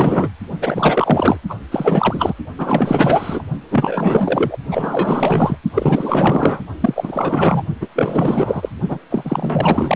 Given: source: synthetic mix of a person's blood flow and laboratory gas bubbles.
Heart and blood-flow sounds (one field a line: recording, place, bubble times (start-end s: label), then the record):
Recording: Doppler ultrasound of blood flow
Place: precordium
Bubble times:
0.00-0.29 s: bubbles
0.60-1.37 s: bubbles
1.49-1.55 s: bubbles
1.71-2.33 s: bubbles
2.58-3.44 s: bubbles
3.71-4.57 s: bubbles
4.71-5.57 s: bubbles
5.74-6.62 s: bubbles
6.80-7.62 s: bubbles
7.81-7.88 s: bubbles
7.96-8.69 s: bubbles
8.88-8.98 s: bubbles
9.10-9.96 s: bubbles
From the record:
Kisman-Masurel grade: 444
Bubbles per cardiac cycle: continuous sound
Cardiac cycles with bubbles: 100%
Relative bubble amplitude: maximal (0.775 to 0.999)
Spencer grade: 4 (maximum detectable bubble signal sounding continuously throughout systole and diastole of every cardiac period, and overriding the amplitude of the normal cardiac signals)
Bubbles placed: only in the low amplitude regions of the cardiac cycle